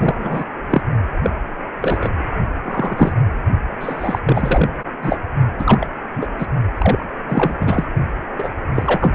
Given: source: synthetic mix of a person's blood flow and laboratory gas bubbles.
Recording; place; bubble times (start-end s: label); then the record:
Doppler ultrasound of blood flow; precordium
0.00-0.44 s: bubbles
0.70-0.82 s: bubbles
1.23-1.30 s: bubbles
1.81-2.10 s: bubbles
2.64-3.14 s: bubbles
3.80-4.19 s: bubbles
4.25-4.68 s: bubbles
5.02-5.17 s: bubbles
5.58-5.89 s: bubbles
6.14-6.27 s: bubbles
6.38-6.46 s: bubbles
6.78-7.06 s: bubbles
7.28-7.58 s: bubbles
7.61-7.88 s: bubbles
8.38-8.49 s: bubbles
8.74-9.14 s: bubbles
From the record:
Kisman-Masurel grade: 243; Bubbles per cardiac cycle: several, 3 to 8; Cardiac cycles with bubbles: 100%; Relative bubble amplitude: loud (0.450 to 0.775); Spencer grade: 3 (all of the cardiac periods contain showers or single bubble signals, but not dominating or overriding the cardiac motion signals); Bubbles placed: only in the low amplitude regions of the cardiac cycle